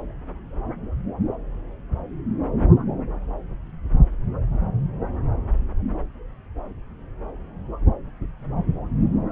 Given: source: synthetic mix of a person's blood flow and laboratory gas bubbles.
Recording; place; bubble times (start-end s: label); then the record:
Doppler ultrasound of blood flow; subclavian vein
no bubbles
From the record:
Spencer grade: 0 (complete lack of bubble signals)